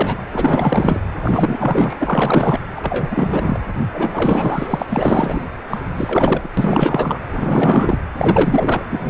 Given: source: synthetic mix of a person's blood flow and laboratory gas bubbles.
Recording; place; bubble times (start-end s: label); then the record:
Doppler ultrasound of blood flow; precordium
0.00-0.17 s: bubbles
0.33-1.00 s: bubbles
1.22-1.96 s: bubbles
2.00-2.60 s: bubbles
2.75-3.08 s: bubbles
3.10-3.59 s: bubbles
3.94-4.86 s: bubbles
4.89-5.45 s: bubbles
5.70-5.80 s: bubbles
5.96-6.49 s: bubbles
6.57-7.18 s: bubbles
7.32-7.99 s: bubbles
8.15-8.84 s: bubbles
8.89-9.10 s: bubbles
From the record:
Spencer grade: 4 (maximum detectable bubble signal sounding continuously throughout systole and diastole of every cardiac period, and overriding the amplitude of the normal cardiac signals); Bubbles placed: anywhere in the cardiac cycle